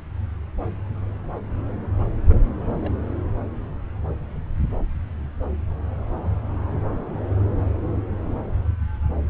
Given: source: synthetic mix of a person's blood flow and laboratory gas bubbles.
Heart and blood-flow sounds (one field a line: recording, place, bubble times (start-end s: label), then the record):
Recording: Doppler ultrasound of blood flow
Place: subclavian vein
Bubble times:
2.28-2.43 s: bubbles
2.68-2.93 s: bubbles
6.69-6.81 s: bubbles
6.91-7.17 s: bubbles
7.20-7.30 s: bubbles
From the record:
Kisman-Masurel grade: 211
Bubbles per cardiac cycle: several, 3 to 8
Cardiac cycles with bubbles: 1 to 10%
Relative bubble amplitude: barely perceptible (0.100 to 0.250)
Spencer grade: 1 (occasional bubble signal discernible with the cardiac motion signal, with majority of cardiac periods free of bubbles)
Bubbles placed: anywhere in the cardiac cycle